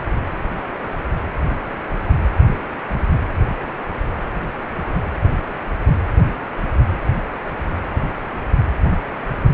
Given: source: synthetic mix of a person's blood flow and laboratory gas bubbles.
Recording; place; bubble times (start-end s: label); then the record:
Doppler ultrasound of blood flow; precordium
no bubbles
From the record:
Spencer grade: 0 (complete lack of bubble signals)